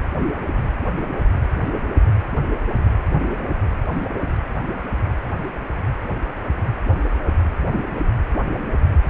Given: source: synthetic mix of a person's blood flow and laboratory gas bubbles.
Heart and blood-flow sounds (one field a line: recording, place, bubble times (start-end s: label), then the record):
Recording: Doppler ultrasound of blood flow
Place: precordium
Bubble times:
no bubbles
From the record:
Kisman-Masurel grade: 000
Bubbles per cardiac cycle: 0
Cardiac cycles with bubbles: 0%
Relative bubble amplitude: no bubbles discernible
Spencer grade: 0 (complete lack of bubble signals)